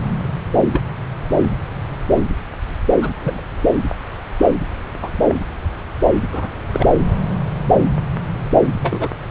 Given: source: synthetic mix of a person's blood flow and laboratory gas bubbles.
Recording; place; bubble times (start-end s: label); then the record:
Doppler ultrasound of blood flow; subclavian vein
0.72-0.83 s: bubbles
3.01-3.10 s: bubbles
3.20-3.41 s: bubbles
5.02-5.11 s: bubbles
5.26-5.39 s: bubbles
6.32-6.50 s: bubbles
6.74-6.87 s: bubbles
8.81-9.08 s: bubbles
From the record:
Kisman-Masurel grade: 122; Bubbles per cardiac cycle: 1 to 2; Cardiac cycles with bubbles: 10 to 50%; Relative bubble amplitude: moderate (0.250 to 0.450); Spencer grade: 2 (many but less than half of the cardiac periods contain bubble signals, singularly or in groups); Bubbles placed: anywhere in the cardiac cycle